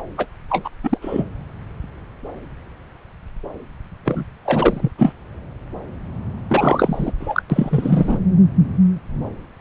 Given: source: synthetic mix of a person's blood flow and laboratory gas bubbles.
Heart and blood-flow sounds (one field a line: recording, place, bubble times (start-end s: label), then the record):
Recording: Doppler ultrasound of blood flow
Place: subclavian vein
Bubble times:
0.18-0.27 s: bubbles
0.49-0.70 s: bubbles
0.83-0.97 s: bubbles
1.01-1.25 s: bubbles
4.04-4.24 s: bubbles
4.45-4.91 s: bubbles
4.98-5.13 s: bubbles
6.49-7.12 s: bubbles
7.19-7.42 s: bubbles
7.50-8.19 s: bubbles
From the record:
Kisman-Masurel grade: 233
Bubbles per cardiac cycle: several, 3 to 8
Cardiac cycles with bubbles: 50 to 99%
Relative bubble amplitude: loud (0.450 to 0.775)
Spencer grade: 3 (all of the cardiac periods contain showers or single bubble signals, but not dominating or overriding the cardiac motion signals)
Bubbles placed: anywhere in the cardiac cycle